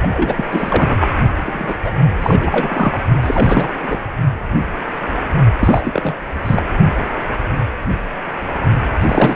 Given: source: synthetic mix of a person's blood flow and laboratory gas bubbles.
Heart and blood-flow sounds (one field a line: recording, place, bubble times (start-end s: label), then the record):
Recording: Doppler ultrasound of blood flow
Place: precordium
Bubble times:
0.00-0.46 s: bubbles
0.51-1.08 s: bubbles
1.40-1.76 s: bubbles
1.84-1.91 s: bubbles
2.21-3.00 s: bubbles
3.23-3.69 s: bubbles
3.83-3.98 s: bubbles
5.60-6.16 s: bubbles
6.45-6.62 s: bubbles
9.01-9.36 s: bubbles
From the record:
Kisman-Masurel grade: 333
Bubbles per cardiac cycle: rolling drumbeat, 9 or more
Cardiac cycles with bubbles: 50 to 99%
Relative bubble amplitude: loud (0.450 to 0.775)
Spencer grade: 3 (all of the cardiac periods contain showers or single bubble signals, but not dominating or overriding the cardiac motion signals)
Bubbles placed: only in the low amplitude regions of the cardiac cycle